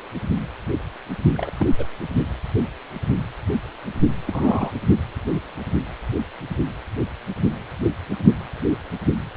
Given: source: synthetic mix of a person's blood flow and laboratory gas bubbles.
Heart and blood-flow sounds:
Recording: Doppler ultrasound of blood flow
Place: precordium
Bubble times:
1.33-1.51 s: bubbles
1.58-1.71 s: bubbles
1.78-1.86 s: bubbles
4.27-4.72 s: bubbles
From the record:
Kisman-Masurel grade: 222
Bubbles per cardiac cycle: several, 3 to 8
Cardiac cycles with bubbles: 10 to 50%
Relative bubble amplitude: moderate (0.250 to 0.450)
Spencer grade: 2 (many but less than half of the cardiac periods contain bubble signals, singularly or in groups)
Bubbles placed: only in the low amplitude regions of the cardiac cycle

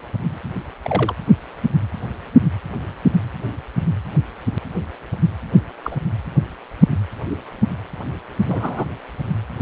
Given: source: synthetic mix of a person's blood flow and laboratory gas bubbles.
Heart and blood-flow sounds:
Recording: Doppler ultrasound of blood flow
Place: precordium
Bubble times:
0.82-1.15 s: bubbles
5.83-5.96 s: bubbles
7.30-7.36 s: bubbles
8.48-8.86 s: bubbles
From the record:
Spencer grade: 2 (many but less than half of the cardiac periods contain bubble signals, singularly or in groups)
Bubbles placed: anywhere in the cardiac cycle

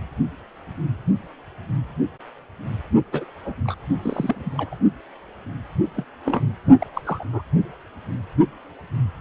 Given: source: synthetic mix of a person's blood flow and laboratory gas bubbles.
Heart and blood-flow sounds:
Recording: Doppler ultrasound of blood flow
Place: precordium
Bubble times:
3.12-3.26 s: bubbles
3.44-3.55 s: bubbles
3.65-3.75 s: bubbles
4.02-4.50 s: bubbles
4.54-4.75 s: bubbles
5.96-6.04 s: bubbles
6.25-6.47 s: bubbles
6.79-6.87 s: bubbles
6.95-7.01 s: bubbles
7.05-7.24 s: bubbles
7.33-7.42 s: bubbles
From the record:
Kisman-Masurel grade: 221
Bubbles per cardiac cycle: several, 3 to 8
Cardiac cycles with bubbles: 10 to 50%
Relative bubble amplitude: barely perceptible (0.100 to 0.250)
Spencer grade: 2 (many but less than half of the cardiac periods contain bubble signals, singularly or in groups)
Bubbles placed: only in the low amplitude regions of the cardiac cycle

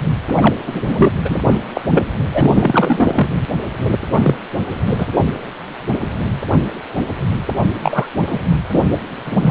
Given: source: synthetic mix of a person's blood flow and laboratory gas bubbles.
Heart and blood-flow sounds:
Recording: Doppler ultrasound of blood flow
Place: precordium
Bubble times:
0.35-0.55 s: bubbles
0.66-0.80 s: bubbles
0.85-1.12 s: bubbles
1.24-1.54 s: bubbles
1.74-1.81 s: bubbles
1.90-2.05 s: bubbles
2.33-3.31 s: bubbles
4.11-4.37 s: bubbles
4.86-5.07 s: bubbles
7.75-8.09 s: bubbles
8.26-8.38 s: bubbles
8.72-8.84 s: bubbles
8.91-8.98 s: bubbles
9.25-9.37 s: bubbles
9.41-9.50 s: bubbles
From the record:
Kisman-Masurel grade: 233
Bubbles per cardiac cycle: several, 3 to 8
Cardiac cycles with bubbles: 50 to 99%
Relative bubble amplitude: loud (0.450 to 0.775)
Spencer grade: 3 (all of the cardiac periods contain showers or single bubble signals, but not dominating or overriding the cardiac motion signals)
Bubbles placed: anywhere in the cardiac cycle

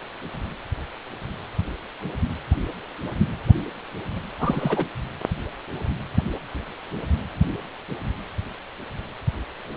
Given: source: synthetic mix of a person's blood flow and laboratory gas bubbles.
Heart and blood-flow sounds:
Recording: Doppler ultrasound of blood flow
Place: precordium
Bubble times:
4.38-4.85 s: bubbles
From the record:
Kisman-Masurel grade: 212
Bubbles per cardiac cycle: several, 3 to 8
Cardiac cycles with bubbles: 1 to 10%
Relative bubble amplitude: moderate (0.250 to 0.450)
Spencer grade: 1 (occasional bubble signal discernible with the cardiac motion signal, with majority of cardiac periods free of bubbles)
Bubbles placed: anywhere in the cardiac cycle

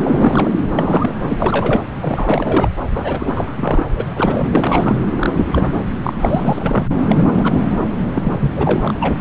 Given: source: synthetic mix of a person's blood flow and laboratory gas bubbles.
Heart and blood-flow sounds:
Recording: Doppler ultrasound of blood flow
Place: subclavian vein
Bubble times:
0.03-0.51 s: bubbles
0.79-1.12 s: bubbles
1.29-1.81 s: bubbles
2.01-2.70 s: bubbles
2.94-3.84 s: bubbles
3.96-4.05 s: bubbles
4.14-4.50 s: bubbles
4.52-4.97 s: bubbles
5.17-5.46 s: bubbles
5.52-5.77 s: bubbles
6.03-6.94 s: bubbles
7.08-7.83 s: bubbles
8.13-8.34 s: bubbles
8.40-8.52 s: bubbles
8.55-8.94 s: bubbles
9.00-9.15 s: bubbles
From the record:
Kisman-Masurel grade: 342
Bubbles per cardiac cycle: rolling drumbeat, 9 or more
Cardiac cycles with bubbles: 100%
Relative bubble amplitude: moderate (0.250 to 0.450)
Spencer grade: 3 (all of the cardiac periods contain showers or single bubble signals, but not dominating or overriding the cardiac motion signals)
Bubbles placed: anywhere in the cardiac cycle

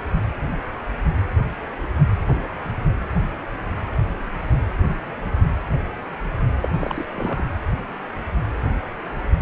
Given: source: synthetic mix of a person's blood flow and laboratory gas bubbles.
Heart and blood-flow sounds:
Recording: Doppler ultrasound of blood flow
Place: precordium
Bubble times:
6.63-6.68 s: bubbles
6.74-7.05 s: bubbles
7.17-7.42 s: bubbles
From the record:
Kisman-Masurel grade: 221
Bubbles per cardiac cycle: several, 3 to 8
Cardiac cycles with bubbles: 10 to 50%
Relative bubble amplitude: barely perceptible (0.100 to 0.250)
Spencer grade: 2 (many but less than half of the cardiac periods contain bubble signals, singularly or in groups)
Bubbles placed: anywhere in the cardiac cycle

